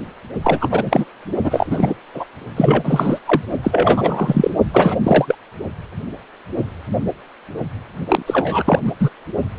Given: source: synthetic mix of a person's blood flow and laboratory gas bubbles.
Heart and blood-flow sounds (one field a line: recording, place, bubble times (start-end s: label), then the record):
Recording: Doppler ultrasound of blood flow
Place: precordium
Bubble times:
0.43-0.69 s: bubbles
0.71-1.04 s: bubbles
1.44-1.67 s: bubbles
1.71-1.95 s: bubbles
2.14-2.24 s: bubbles
2.56-3.18 s: bubbles
3.25-3.41 s: bubbles
3.63-4.50 s: bubbles
4.73-4.96 s: bubbles
5.03-5.35 s: bubbles
8.06-8.22 s: bubbles
8.26-8.79 s: bubbles
8.84-8.92 s: bubbles
8.99-9.09 s: bubbles
From the record:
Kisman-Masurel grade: 333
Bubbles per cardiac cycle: rolling drumbeat, 9 or more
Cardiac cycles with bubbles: 50 to 99%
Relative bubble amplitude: loud (0.450 to 0.775)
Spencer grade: 3 (all of the cardiac periods contain showers or single bubble signals, but not dominating or overriding the cardiac motion signals)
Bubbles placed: only in the low amplitude regions of the cardiac cycle